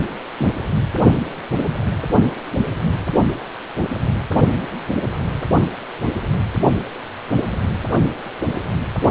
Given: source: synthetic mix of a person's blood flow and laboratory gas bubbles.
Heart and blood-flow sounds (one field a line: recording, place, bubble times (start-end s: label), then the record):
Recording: Doppler ultrasound of blood flow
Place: precordium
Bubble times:
0.37-0.47 s: bubbles
From the record:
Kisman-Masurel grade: 122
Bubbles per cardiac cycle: 1 to 2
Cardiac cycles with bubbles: 10 to 50%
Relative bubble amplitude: moderate (0.250 to 0.450)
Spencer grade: 2 (many but less than half of the cardiac periods contain bubble signals, singularly or in groups)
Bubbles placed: only in the low amplitude regions of the cardiac cycle